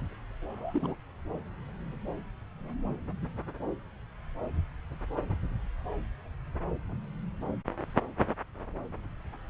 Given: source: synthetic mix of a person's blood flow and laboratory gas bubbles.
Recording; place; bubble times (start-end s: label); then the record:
Doppler ultrasound of blood flow; subclavian vein
0.49-0.96 s: bubbles
From the record:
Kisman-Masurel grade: 211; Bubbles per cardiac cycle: several, 3 to 8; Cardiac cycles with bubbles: 1 to 10%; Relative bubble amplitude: barely perceptible (0.100 to 0.250); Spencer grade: 1 (occasional bubble signal discernible with the cardiac motion signal, with majority of cardiac periods free of bubbles); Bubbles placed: anywhere in the cardiac cycle